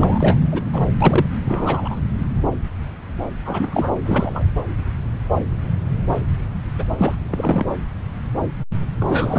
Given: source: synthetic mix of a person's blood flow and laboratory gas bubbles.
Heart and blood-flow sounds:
Doppler ultrasound of blood flow; subclavian vein
0.00-0.36 s: bubbles
0.51-0.61 s: bubbles
0.72-0.82 s: bubbles
1.00-1.26 s: bubbles
1.45-2.00 s: bubbles
3.46-3.93 s: bubbles
4.05-4.45 s: bubbles
6.78-6.84 s: bubbles
6.97-7.15 s: bubbles
7.30-7.66 s: bubbles
8.99-9.38 s: bubbles
From the record:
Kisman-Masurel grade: 233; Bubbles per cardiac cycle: several, 3 to 8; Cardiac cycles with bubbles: 50 to 99%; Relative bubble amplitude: loud (0.450 to 0.775); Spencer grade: 3 (all of the cardiac periods contain showers or single bubble signals, but not dominating or overriding the cardiac motion signals); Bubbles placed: anywhere in the cardiac cycle

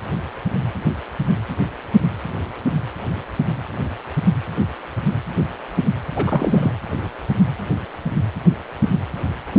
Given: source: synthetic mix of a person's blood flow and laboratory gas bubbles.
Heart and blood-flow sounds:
Doppler ultrasound of blood flow; precordium
6.16-6.73 s: bubbles
From the record:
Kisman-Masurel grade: 213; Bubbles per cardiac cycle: several, 3 to 8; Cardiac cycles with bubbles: 1 to 10%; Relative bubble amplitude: loud (0.450 to 0.775); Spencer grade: 1 (occasional bubble signal discernible with the cardiac motion signal, with majority of cardiac periods free of bubbles); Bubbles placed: anywhere in the cardiac cycle

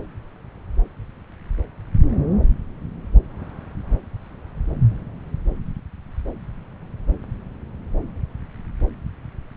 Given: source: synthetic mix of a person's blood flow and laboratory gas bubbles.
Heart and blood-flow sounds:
Doppler ultrasound of blood flow; subclavian vein
no bubbles
From the record:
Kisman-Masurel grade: 000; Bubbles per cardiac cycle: 0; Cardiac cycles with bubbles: 0%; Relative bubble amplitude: no bubbles discernible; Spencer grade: 0 (complete lack of bubble signals)

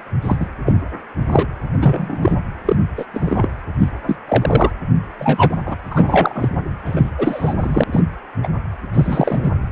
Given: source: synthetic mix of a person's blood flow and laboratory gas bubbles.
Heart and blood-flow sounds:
Doppler ultrasound of blood flow; precordium
0.22-0.36 s: bubbles
0.40-0.46 s: bubbles
0.65-0.73 s: bubbles
1.27-1.46 s: bubbles
1.81-2.36 s: bubbles
2.65-2.76 s: bubbles
2.97-3.05 s: bubbles
3.14-3.48 s: bubbles
3.79-3.89 s: bubbles
4.07-4.17 s: bubbles
4.28-4.71 s: bubbles
5.19-5.57 s: bubbles
5.66-5.76 s: bubbles
5.91-6.49 s: bubbles
6.85-7.11 s: bubbles
7.17-7.54 s: bubbles
7.58-7.84 s: bubbles
7.92-8.03 s: bubbles
8.43-8.48 s: bubbles
8.94-9.51 s: bubbles
From the record:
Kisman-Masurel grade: 243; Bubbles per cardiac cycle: several, 3 to 8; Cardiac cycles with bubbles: 100%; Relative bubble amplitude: loud (0.450 to 0.775); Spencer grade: 3 (all of the cardiac periods contain showers or single bubble signals, but not dominating or overriding the cardiac motion signals); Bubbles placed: anywhere in the cardiac cycle

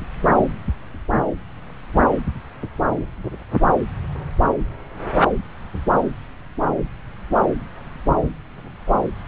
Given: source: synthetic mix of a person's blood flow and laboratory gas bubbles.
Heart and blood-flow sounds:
Doppler ultrasound of blood flow; subclavian vein
no bubbles
From the record:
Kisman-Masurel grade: 000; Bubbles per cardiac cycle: 0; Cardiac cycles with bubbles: 0%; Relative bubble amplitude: no bubbles discernible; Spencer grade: 0 (complete lack of bubble signals)

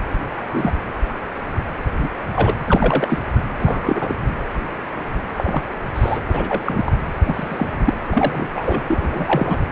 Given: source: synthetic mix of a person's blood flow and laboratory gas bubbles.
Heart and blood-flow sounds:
Doppler ultrasound of blood flow; precordium
0.28-0.72 s: bubbles
1.99-2.08 s: bubbles
2.33-2.55 s: bubbles
2.67-3.19 s: bubbles
3.58-4.14 s: bubbles
5.38-5.63 s: bubbles
5.95-6.21 s: bubbles
6.28-6.62 s: bubbles
6.65-6.92 s: bubbles
7.25-7.68 s: bubbles
7.85-7.94 s: bubbles
8.09-8.48 s: bubbles
8.54-8.84 s: bubbles
8.88-9.60 s: bubbles
From the record:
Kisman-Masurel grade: 233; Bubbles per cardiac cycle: several, 3 to 8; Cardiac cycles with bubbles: 50 to 99%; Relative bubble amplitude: loud (0.450 to 0.775); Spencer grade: 3 (all of the cardiac periods contain showers or single bubble signals, but not dominating or overriding the cardiac motion signals); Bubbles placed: anywhere in the cardiac cycle

